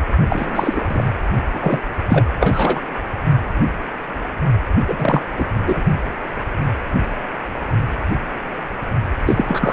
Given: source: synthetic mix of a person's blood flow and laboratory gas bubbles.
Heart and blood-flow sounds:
Doppler ultrasound of blood flow; precordium
0.28-0.85 s: bubbles
0.89-1.07 s: bubbles
1.51-1.84 s: bubbles
2.08-2.25 s: bubbles
2.40-2.82 s: bubbles
4.88-5.22 s: bubbles
5.37-5.46 s: bubbles
5.66-5.83 s: bubbles
9.26-9.72 s: bubbles
From the record:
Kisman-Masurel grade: 233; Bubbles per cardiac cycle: several, 3 to 8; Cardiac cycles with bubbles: 50 to 99%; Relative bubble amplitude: loud (0.450 to 0.775); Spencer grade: 3 (all of the cardiac periods contain showers or single bubble signals, but not dominating or overriding the cardiac motion signals); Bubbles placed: only in the low amplitude regions of the cardiac cycle

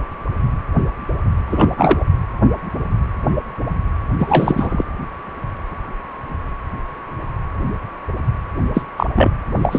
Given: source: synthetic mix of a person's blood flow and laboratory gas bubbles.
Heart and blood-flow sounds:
Doppler ultrasound of blood flow; precordium
1.46-1.70 s: bubbles
1.77-2.06 s: bubbles
4.19-4.83 s: bubbles
8.73-8.81 s: bubbles
8.97-9.06 s: bubbles
9.15-9.30 s: bubbles
9.62-9.79 s: bubbles
From the record:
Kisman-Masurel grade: 223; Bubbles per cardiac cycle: several, 3 to 8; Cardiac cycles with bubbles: 10 to 50%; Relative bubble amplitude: loud (0.450 to 0.775); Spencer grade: 2 (many but less than half of the cardiac periods contain bubble signals, singularly or in groups); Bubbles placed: anywhere in the cardiac cycle

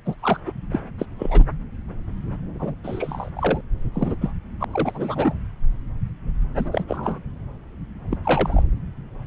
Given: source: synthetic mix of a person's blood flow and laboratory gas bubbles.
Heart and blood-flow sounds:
Doppler ultrasound of blood flow; subclavian vein
0.05-0.15 s: bubbles
0.22-0.40 s: bubbles
0.46-0.51 s: bubbles
0.71-0.79 s: bubbles
0.98-1.06 s: bubbles
1.19-1.44 s: bubbles
2.54-2.75 s: bubbles
2.83-3.30 s: bubbles
3.35-3.61 s: bubbles
3.94-4.15 s: bubbles
4.21-4.33 s: bubbles
4.60-4.64 s: bubbles
4.72-5.33 s: bubbles
6.57-6.67 s: bubbles
6.71-6.83 s: bubbles
6.88-7.18 s: bubbles
8.10-8.17 s: bubbles
8.24-8.63 s: bubbles
From the record:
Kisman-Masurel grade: 232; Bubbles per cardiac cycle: several, 3 to 8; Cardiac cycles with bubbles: 50 to 99%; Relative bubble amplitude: moderate (0.250 to 0.450); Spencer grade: 3 (all of the cardiac periods contain showers or single bubble signals, but not dominating or overriding the cardiac motion signals); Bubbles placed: anywhere in the cardiac cycle

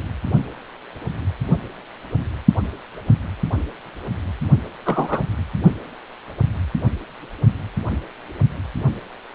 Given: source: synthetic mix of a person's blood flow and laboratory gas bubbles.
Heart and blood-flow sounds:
Doppler ultrasound of blood flow; precordium
4.86-5.23 s: bubbles
From the record:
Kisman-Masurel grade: 113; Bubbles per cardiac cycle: 1 to 2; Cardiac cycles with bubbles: 1 to 10%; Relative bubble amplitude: loud (0.450 to 0.775); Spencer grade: 1 (occasional bubble signal discernible with the cardiac motion signal, with majority of cardiac periods free of bubbles); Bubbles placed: only in the low amplitude regions of the cardiac cycle

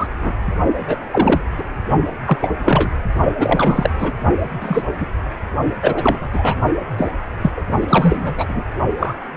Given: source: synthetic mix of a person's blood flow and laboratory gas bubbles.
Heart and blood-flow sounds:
Doppler ultrasound of blood flow; precordium
0.00-0.07 s: bubbles
0.22-0.34 s: bubbles
0.88-0.98 s: bubbles
1.10-1.42 s: bubbles
1.58-1.63 s: bubbles
2.25-2.37 s: bubbles
2.41-2.51 s: bubbles
2.63-2.89 s: bubbles
3.38-3.90 s: bubbles
3.98-4.15 s: bubbles
4.60-4.84 s: bubbles
5.00-5.06 s: bubbles
5.81-6.29 s: bubbles
6.32-6.55 s: bubbles
6.97-7.11 s: bubbles
7.41-7.51 s: bubbles
7.57-7.62 s: bubbles
7.81-8.35 s: bubbles
8.37-8.63 s: bubbles
8.98-9.14 s: bubbles
From the record:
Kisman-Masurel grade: 233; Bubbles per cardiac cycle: several, 3 to 8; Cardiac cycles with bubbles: 50 to 99%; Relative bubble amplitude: loud (0.450 to 0.775); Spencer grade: 3 (all of the cardiac periods contain showers or single bubble signals, but not dominating or overriding the cardiac motion signals); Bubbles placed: only in the low amplitude regions of the cardiac cycle

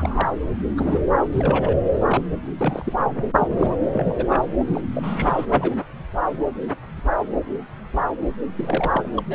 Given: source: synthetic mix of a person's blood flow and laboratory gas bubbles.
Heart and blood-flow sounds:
Doppler ultrasound of blood flow; subclavian vein
0.00-0.30 s: bubbles
0.77-1.03 s: bubbles
1.31-1.77 s: bubbles
2.06-2.23 s: bubbles
2.42-3.76 s: bubbles
3.92-4.43 s: bubbles
4.59-4.82 s: bubbles
4.93-5.46 s: bubbles
5.50-5.75 s: bubbles
8.56-9.11 s: bubbles
9.16-9.23 s: bubbles
9.30-9.35 s: bubbles
From the record:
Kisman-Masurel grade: 332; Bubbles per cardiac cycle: rolling drumbeat, 9 or more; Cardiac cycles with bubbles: 50 to 99%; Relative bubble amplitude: moderate (0.250 to 0.450); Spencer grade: 3 (all of the cardiac periods contain showers or single bubble signals, but not dominating or overriding the cardiac motion signals); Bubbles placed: anywhere in the cardiac cycle

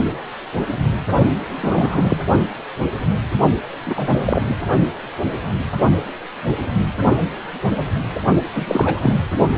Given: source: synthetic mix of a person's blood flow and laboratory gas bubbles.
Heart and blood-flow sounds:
Doppler ultrasound of blood flow; precordium
1.54-2.17 s: bubbles
3.86-4.41 s: bubbles
4.47-4.56 s: bubbles
8.54-9.15 s: bubbles
From the record:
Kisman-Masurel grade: 233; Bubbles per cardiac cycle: several, 3 to 8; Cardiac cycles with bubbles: 50 to 99%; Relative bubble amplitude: loud (0.450 to 0.775); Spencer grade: 3 (all of the cardiac periods contain showers or single bubble signals, but not dominating or overriding the cardiac motion signals); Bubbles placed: only in the low amplitude regions of the cardiac cycle

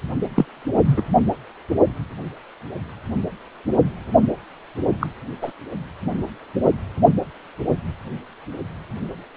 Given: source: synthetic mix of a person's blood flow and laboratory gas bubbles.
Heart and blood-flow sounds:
Doppler ultrasound of blood flow; precordium
0.35-0.46 s: bubbles
0.84-1.02 s: bubbles
4.99-5.07 s: bubbles
5.41-5.51 s: bubbles
From the record:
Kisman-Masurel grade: 122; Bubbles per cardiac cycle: 1 to 2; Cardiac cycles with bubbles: 10 to 50%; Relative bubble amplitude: moderate (0.250 to 0.450); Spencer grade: 2 (many but less than half of the cardiac periods contain bubble signals, singularly or in groups); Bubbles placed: only in the low amplitude regions of the cardiac cycle

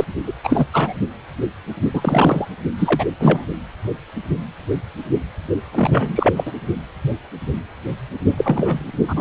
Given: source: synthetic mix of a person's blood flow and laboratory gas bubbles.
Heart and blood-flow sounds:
Doppler ultrasound of blood flow; precordium
0.00-0.04 s: bubbles
0.27-0.33 s: bubbles
0.43-0.67 s: bubbles
0.72-0.93 s: bubbles
1.93-2.48 s: bubbles
2.78-3.05 s: bubbles
3.19-3.45 s: bubbles
5.71-6.52 s: bubbles
8.38-8.92 s: bubbles
9.08-9.21 s: bubbles
From the record:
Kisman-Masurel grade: 233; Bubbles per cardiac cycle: several, 3 to 8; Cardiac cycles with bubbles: 50 to 99%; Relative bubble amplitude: loud (0.450 to 0.775); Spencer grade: 3 (all of the cardiac periods contain showers or single bubble signals, but not dominating or overriding the cardiac motion signals); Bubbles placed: only in the low amplitude regions of the cardiac cycle

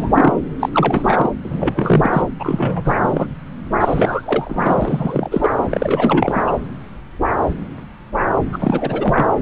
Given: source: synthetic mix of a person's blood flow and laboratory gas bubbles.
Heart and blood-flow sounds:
Doppler ultrasound of blood flow; subclavian vein
0.00-0.33 s: bubbles
0.59-0.69 s: bubbles
0.72-1.31 s: bubbles
1.44-2.28 s: bubbles
2.39-2.94 s: bubbles
3.03-3.27 s: bubbles
3.80-5.50 s: bubbles
5.70-6.55 s: bubbles
8.52-9.26 s: bubbles
From the record:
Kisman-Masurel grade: 333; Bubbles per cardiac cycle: rolling drumbeat, 9 or more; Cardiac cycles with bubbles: 50 to 99%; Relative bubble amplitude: loud (0.450 to 0.775); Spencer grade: 3 (all of the cardiac periods contain showers or single bubble signals, but not dominating or overriding the cardiac motion signals); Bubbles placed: anywhere in the cardiac cycle

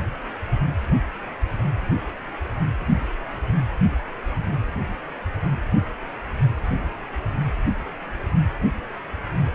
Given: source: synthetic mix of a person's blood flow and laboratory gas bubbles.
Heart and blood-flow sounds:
Doppler ultrasound of blood flow; precordium
no bubbles
From the record:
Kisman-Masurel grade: 000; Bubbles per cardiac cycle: 0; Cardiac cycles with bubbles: 0%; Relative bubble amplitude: no bubbles discernible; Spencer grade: 0 (complete lack of bubble signals)

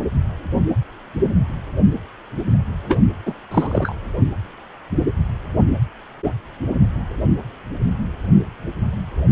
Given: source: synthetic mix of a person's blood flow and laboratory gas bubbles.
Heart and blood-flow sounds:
Doppler ultrasound of blood flow; precordium
2.88-3.00 s: bubbles
3.25-3.33 s: bubbles
3.51-3.93 s: bubbles
From the record:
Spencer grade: 1 (occasional bubble signal discernible with the cardiac motion signal, with majority of cardiac periods free of bubbles); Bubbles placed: anywhere in the cardiac cycle

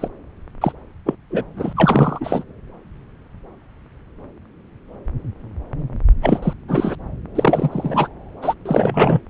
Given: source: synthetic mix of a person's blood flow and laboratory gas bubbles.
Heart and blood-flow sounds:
Doppler ultrasound of blood flow; subclavian vein
0.00-0.08 s: bubbles
0.61-0.72 s: bubbles
1.06-1.15 s: bubbles
1.30-1.43 s: bubbles
1.56-1.73 s: bubbles
1.76-2.44 s: bubbles
6.22-6.53 s: bubbles
6.68-6.95 s: bubbles
7.35-8.08 s: bubbles
8.42-8.54 s: bubbles
8.66-9.21 s: bubbles
From the record:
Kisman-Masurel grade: 333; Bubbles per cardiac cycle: rolling drumbeat, 9 or more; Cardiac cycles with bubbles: 50 to 99%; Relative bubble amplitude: loud (0.450 to 0.775); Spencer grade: 3 (all of the cardiac periods contain showers or single bubble signals, but not dominating or overriding the cardiac motion signals); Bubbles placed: anywhere in the cardiac cycle

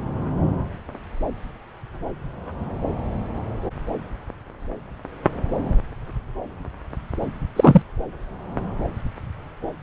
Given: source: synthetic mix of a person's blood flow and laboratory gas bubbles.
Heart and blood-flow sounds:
Doppler ultrasound of blood flow; subclavian vein
7.56-7.82 s: bubbles
From the record:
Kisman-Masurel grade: 113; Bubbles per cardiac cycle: 1 to 2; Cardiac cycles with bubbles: 1 to 10%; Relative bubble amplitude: loud (0.450 to 0.775); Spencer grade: 1 (occasional bubble signal discernible with the cardiac motion signal, with majority of cardiac periods free of bubbles); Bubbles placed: anywhere in the cardiac cycle

